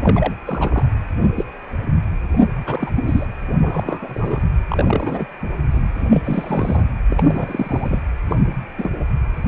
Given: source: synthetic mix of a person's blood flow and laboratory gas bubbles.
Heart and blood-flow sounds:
Doppler ultrasound of blood flow; precordium
0.02-0.33 s: bubbles
0.47-0.85 s: bubbles
1.20-1.44 s: bubbles
2.65-2.91 s: bubbles
2.96-3.25 s: bubbles
3.61-4.45 s: bubbles
4.68-5.26 s: bubbles
5.71-5.91 s: bubbles
5.95-6.21 s: bubbles
6.24-6.89 s: bubbles
7.11-8.00 s: bubbles
8.29-8.36 s: bubbles
8.77-8.91 s: bubbles
9.36-9.48 s: bubbles
From the record:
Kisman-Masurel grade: 242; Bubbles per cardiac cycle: several, 3 to 8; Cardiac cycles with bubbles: 100%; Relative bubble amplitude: moderate (0.250 to 0.450); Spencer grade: 3 (all of the cardiac periods contain showers or single bubble signals, but not dominating or overriding the cardiac motion signals); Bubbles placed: anywhere in the cardiac cycle

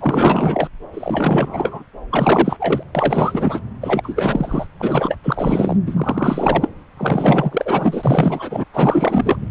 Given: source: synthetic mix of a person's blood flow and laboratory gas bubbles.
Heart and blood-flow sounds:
Doppler ultrasound of blood flow; subclavian vein
0.00-0.69 s: bubbles
0.93-1.84 s: bubbles
2.10-2.83 s: bubbles
2.94-3.60 s: bubbles
3.81-4.67 s: bubbles
4.79-5.17 s: bubbles
5.23-5.78 s: bubbles
5.86-6.69 s: bubbles
6.97-8.64 s: bubbles
8.73-9.38 s: bubbles
From the record:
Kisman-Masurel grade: 444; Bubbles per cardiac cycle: continuous sound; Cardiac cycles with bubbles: 100%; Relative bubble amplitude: maximal (0.775 to 0.999); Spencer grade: 4 (maximum detectable bubble signal sounding continuously throughout systole and diastole of every cardiac period, and overriding the amplitude of the normal cardiac signals); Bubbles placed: anywhere in the cardiac cycle

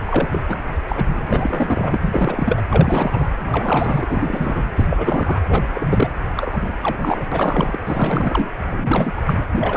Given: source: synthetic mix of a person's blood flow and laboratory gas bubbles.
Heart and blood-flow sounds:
Doppler ultrasound of blood flow; precordium
0.07-0.42 s: bubbles
0.48-0.62 s: bubbles
0.88-1.06 s: bubbles
1.11-1.98 s: bubbles
2.02-2.61 s: bubbles
2.71-3.28 s: bubbles
3.44-4.06 s: bubbles
4.10-4.64 s: bubbles
4.77-5.38 s: bubbles
5.49-5.63 s: bubbles
5.74-6.12 s: bubbles
6.37-6.57 s: bubbles
6.62-6.79 s: bubbles
6.83-7.26 s: bubbles
7.32-7.79 s: bubbles
7.85-8.47 s: bubbles
8.70-9.12 s: bubbles
9.16-9.21 s: bubbles
9.26-9.44 s: bubbles
9.51-9.77 s: bubbles
From the record:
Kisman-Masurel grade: 342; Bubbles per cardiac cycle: rolling drumbeat, 9 or more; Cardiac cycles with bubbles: 100%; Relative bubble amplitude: moderate (0.250 to 0.450); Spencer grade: 3 (all of the cardiac periods contain showers or single bubble signals, but not dominating or overriding the cardiac motion signals); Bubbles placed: anywhere in the cardiac cycle

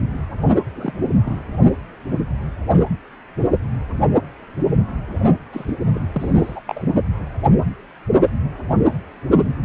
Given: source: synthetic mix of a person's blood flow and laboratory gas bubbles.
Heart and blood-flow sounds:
Doppler ultrasound of blood flow; precordium
0.76-0.93 s: bubbles
1.24-1.42 s: bubbles
5.53-5.72 s: bubbles
5.95-6.04 s: bubbles
6.12-6.62 s: bubbles
6.67-6.83 s: bubbles
From the record:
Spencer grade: 2 (many but less than half of the cardiac periods contain bubble signals, singularly or in groups); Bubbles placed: only in the low amplitude regions of the cardiac cycle

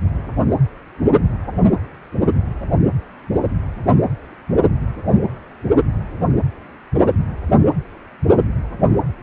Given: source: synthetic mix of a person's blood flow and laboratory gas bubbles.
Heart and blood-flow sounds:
Doppler ultrasound of blood flow; precordium
3.77-3.92 s: bubbles
From the record:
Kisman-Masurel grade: 121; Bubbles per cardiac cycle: 1 to 2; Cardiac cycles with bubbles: 10 to 50%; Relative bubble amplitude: barely perceptible (0.100 to 0.250); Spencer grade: 2 (many but less than half of the cardiac periods contain bubble signals, singularly or in groups); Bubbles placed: anywhere in the cardiac cycle

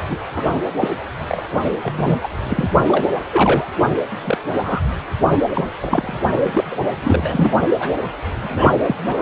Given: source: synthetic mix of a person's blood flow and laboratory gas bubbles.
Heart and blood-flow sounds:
Doppler ultrasound of blood flow; precordium
0.10-0.18 s: bubbles
0.34-0.60 s: bubbles
0.80-0.88 s: bubbles
1.19-1.48 s: bubbles
1.83-2.19 s: bubbles
2.23-2.29 s: bubbles
2.43-2.70 s: bubbles
2.87-3.06 s: bubbles
3.31-3.68 s: bubbles
4.24-4.38 s: bubbles
4.54-4.82 s: bubbles
5.31-5.37 s: bubbles
5.54-5.71 s: bubbles
5.81-6.23 s: bubbles
6.31-6.64 s: bubbles
6.71-6.77 s: bubbles
7.00-7.53 s: bubbles
7.79-7.91 s: bubbles
8.35-8.71 s: bubbles
8.87-8.96 s: bubbles
9.06-9.22 s: bubbles
From the record:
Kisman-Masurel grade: 243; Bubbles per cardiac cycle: several, 3 to 8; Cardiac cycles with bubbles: 100%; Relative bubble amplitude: loud (0.450 to 0.775); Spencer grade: 3 (all of the cardiac periods contain showers or single bubble signals, but not dominating or overriding the cardiac motion signals); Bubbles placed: anywhere in the cardiac cycle

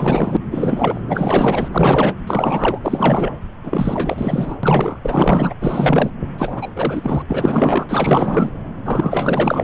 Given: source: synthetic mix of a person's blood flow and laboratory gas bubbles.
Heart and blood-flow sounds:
Doppler ultrasound of blood flow; subclavian vein
0.00-0.37 s: bubbles
0.51-1.01 s: bubbles
1.07-1.69 s: bubbles
1.72-2.15 s: bubbles
2.26-2.80 s: bubbles
2.83-3.32 s: bubbles
3.63-4.57 s: bubbles
4.63-5.00 s: bubbles
5.04-5.54 s: bubbles
5.61-6.11 s: bubbles
6.38-6.71 s: bubbles
6.75-7.22 s: bubbles
7.28-7.86 s: bubbles
7.89-8.50 s: bubbles
8.84-9.64 s: bubbles
From the record:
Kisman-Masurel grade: 444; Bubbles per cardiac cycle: continuous sound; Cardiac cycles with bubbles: 100%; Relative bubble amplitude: maximal (0.775 to 0.999); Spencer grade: 4 (maximum detectable bubble signal sounding continuously throughout systole and diastole of every cardiac period, and overriding the amplitude of the normal cardiac signals); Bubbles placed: anywhere in the cardiac cycle

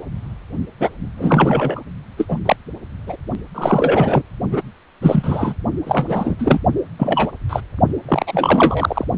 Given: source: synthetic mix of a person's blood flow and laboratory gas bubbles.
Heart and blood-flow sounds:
Doppler ultrasound of blood flow; precordium
0.79-0.90 s: bubbles
1.17-1.81 s: bubbles
2.18-2.25 s: bubbles
2.29-2.38 s: bubbles
2.46-2.56 s: bubbles
3.06-3.16 s: bubbles
3.55-4.22 s: bubbles
4.50-4.61 s: bubbles
5.01-5.54 s: bubbles
5.86-6.35 s: bubbles
6.38-6.59 s: bubbles
6.98-7.31 s: bubbles
7.49-7.60 s: bubbles
8.08-9.04 s: bubbles
From the record:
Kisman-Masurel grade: 243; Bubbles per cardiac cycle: several, 3 to 8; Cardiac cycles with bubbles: 100%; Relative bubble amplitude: loud (0.450 to 0.775); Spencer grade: 3 (all of the cardiac periods contain showers or single bubble signals, but not dominating or overriding the cardiac motion signals); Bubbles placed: only in the low amplitude regions of the cardiac cycle

